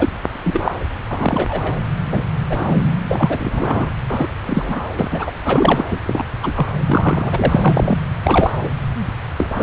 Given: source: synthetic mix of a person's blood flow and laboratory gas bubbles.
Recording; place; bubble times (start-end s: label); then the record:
Doppler ultrasound of blood flow; subclavian vein
0.00-0.09 s: bubbles
0.43-0.74 s: bubbles
1.09-1.75 s: bubbles
2.05-2.24 s: bubbles
2.49-2.82 s: bubbles
3.08-3.90 s: bubbles
4.08-4.27 s: bubbles
4.46-4.81 s: bubbles
4.99-5.08 s: bubbles
5.11-5.31 s: bubbles
5.44-5.85 s: bubbles
5.91-6.00 s: bubbles
6.05-6.25 s: bubbles
6.41-6.52 s: bubbles
6.54-6.67 s: bubbles
6.86-7.98 s: bubbles
8.23-8.53 s: bubbles
8.63-8.70 s: bubbles
9.38-9.48 s: bubbles
9.55-9.63 s: bubbles
From the record:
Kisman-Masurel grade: 243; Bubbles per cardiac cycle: several, 3 to 8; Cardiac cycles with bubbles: 100%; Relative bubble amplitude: loud (0.450 to 0.775); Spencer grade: 3 (all of the cardiac periods contain showers or single bubble signals, but not dominating or overriding the cardiac motion signals); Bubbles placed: anywhere in the cardiac cycle